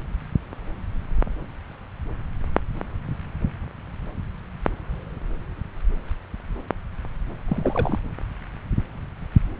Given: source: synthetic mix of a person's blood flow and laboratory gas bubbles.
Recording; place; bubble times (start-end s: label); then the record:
Doppler ultrasound of blood flow; subclavian vein
7.48-8.00 s: bubbles
From the record:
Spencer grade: 1 (occasional bubble signal discernible with the cardiac motion signal, with majority of cardiac periods free of bubbles); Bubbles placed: anywhere in the cardiac cycle